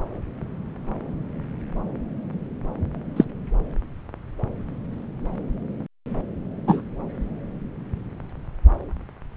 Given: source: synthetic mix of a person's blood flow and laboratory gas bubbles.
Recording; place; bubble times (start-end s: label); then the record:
Doppler ultrasound of blood flow; subclavian vein
3.16-3.25 s: bubbles
6.67-6.82 s: bubbles
From the record:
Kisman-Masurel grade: 123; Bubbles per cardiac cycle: 1 to 2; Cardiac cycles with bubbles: 10 to 50%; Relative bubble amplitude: loud (0.450 to 0.775); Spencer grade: 2 (many but less than half of the cardiac periods contain bubble signals, singularly or in groups); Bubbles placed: anywhere in the cardiac cycle